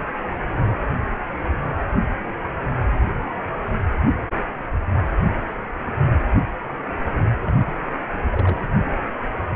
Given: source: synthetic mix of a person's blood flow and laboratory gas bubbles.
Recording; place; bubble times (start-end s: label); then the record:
Doppler ultrasound of blood flow; precordium
7.40-7.88 s: bubbles
8.13-8.19 s: bubbles
8.32-8.62 s: bubbles
From the record:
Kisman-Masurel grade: 211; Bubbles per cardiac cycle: several, 3 to 8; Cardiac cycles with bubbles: 1 to 10%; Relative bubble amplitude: barely perceptible (0.100 to 0.250); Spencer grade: 1 (occasional bubble signal discernible with the cardiac motion signal, with majority of cardiac periods free of bubbles); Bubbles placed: anywhere in the cardiac cycle